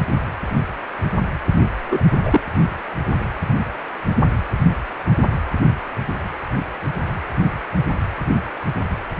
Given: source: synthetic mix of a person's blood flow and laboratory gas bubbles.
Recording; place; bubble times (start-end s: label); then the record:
Doppler ultrasound of blood flow; precordium
1.91-2.10 s: bubbles
2.22-2.41 s: bubbles
From the record:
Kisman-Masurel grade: 112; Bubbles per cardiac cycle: 1 to 2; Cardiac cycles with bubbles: 1 to 10%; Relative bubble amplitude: moderate (0.250 to 0.450); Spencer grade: 1 (occasional bubble signal discernible with the cardiac motion signal, with majority of cardiac periods free of bubbles); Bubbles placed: anywhere in the cardiac cycle